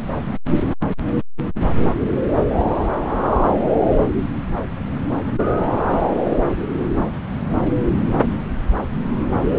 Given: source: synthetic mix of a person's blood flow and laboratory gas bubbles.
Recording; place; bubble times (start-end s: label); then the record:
Doppler ultrasound of blood flow; subclavian vein
no bubbles
From the record:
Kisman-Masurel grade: 000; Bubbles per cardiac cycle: 0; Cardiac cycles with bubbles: 0%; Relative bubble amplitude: no bubbles discernible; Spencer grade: 0 (complete lack of bubble signals)